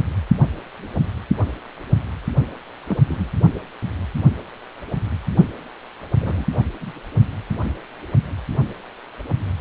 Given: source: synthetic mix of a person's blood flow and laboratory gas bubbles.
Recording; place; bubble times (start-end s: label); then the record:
Doppler ultrasound of blood flow; precordium
2.88-2.98 s: bubbles
3.08-3.27 s: bubbles
6.18-6.45 s: bubbles
6.53-6.64 s: bubbles
6.80-6.92 s: bubbles
From the record:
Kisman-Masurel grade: 121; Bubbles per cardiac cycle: 1 to 2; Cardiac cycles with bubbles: 10 to 50%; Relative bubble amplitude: barely perceptible (0.100 to 0.250); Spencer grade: 2 (many but less than half of the cardiac periods contain bubble signals, singularly or in groups); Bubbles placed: anywhere in the cardiac cycle